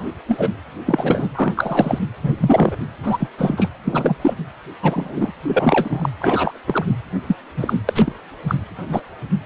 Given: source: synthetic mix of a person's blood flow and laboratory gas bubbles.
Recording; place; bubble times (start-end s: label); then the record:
Doppler ultrasound of blood flow; precordium
0.28-0.51 s: bubbles
0.86-1.28 s: bubbles
1.35-1.53 s: bubbles
1.56-1.99 s: bubbles
2.23-2.76 s: bubbles
3.03-3.28 s: bubbles
3.38-3.70 s: bubbles
3.84-4.18 s: bubbles
4.21-4.34 s: bubbles
4.82-5.32 s: bubbles
5.43-6.09 s: bubbles
6.19-6.58 s: bubbles
6.67-6.85 s: bubbles
7.27-7.35 s: bubbles
7.56-7.73 s: bubbles
7.88-8.12 s: bubbles
8.47-8.55 s: bubbles
8.89-9.00 s: bubbles
From the record:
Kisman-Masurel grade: 233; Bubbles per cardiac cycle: several, 3 to 8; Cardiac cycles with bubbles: 50 to 99%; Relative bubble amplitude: loud (0.450 to 0.775); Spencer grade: 3 (all of the cardiac periods contain showers or single bubble signals, but not dominating or overriding the cardiac motion signals); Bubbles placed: anywhere in the cardiac cycle